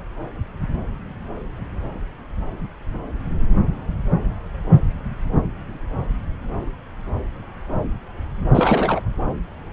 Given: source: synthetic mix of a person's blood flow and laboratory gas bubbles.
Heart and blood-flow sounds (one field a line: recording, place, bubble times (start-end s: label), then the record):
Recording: Doppler ultrasound of blood flow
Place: subclavian vein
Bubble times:
8.54-9.01 s: bubbles
From the record:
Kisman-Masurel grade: 213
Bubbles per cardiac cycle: several, 3 to 8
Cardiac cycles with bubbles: 1 to 10%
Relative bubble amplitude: loud (0.450 to 0.775)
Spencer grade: 1 (occasional bubble signal discernible with the cardiac motion signal, with majority of cardiac periods free of bubbles)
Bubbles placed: anywhere in the cardiac cycle